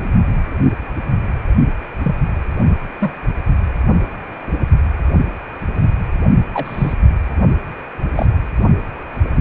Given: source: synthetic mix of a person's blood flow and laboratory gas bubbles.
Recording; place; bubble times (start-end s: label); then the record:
Doppler ultrasound of blood flow; precordium
2.04-2.16 s: bubbles
3.00-3.14 s: bubbles
6.54-6.94 s: bubbles
8.15-8.26 s: bubbles
From the record:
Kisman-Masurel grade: 122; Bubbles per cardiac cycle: 1 to 2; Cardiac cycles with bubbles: 10 to 50%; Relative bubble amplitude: moderate (0.250 to 0.450); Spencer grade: 2 (many but less than half of the cardiac periods contain bubble signals, singularly or in groups); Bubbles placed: anywhere in the cardiac cycle